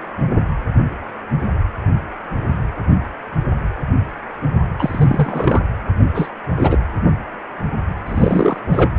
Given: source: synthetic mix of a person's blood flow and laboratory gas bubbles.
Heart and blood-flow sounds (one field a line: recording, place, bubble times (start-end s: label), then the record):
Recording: Doppler ultrasound of blood flow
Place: precordium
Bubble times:
4.79-5.61 s: bubbles
6.14-6.29 s: bubbles
6.56-6.79 s: bubbles
8.06-8.60 s: bubbles
8.69-8.90 s: bubbles
From the record:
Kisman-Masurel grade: 222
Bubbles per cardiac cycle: several, 3 to 8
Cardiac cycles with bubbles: 10 to 50%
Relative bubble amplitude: moderate (0.250 to 0.450)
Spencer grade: 2 (many but less than half of the cardiac periods contain bubble signals, singularly or in groups)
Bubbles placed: anywhere in the cardiac cycle